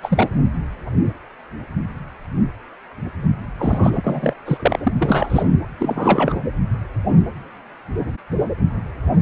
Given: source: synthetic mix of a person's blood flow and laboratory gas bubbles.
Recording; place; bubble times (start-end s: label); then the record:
Doppler ultrasound of blood flow; precordium
0.03-0.30 s: bubbles
3.58-4.33 s: bubbles
4.46-4.79 s: bubbles
4.83-4.93 s: bubbles
5.01-5.50 s: bubbles
5.76-6.40 s: bubbles
From the record:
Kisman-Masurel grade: 333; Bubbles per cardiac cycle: rolling drumbeat, 9 or more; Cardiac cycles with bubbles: 50 to 99%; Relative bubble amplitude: loud (0.450 to 0.775); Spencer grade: 3 (all of the cardiac periods contain showers or single bubble signals, but not dominating or overriding the cardiac motion signals); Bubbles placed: anywhere in the cardiac cycle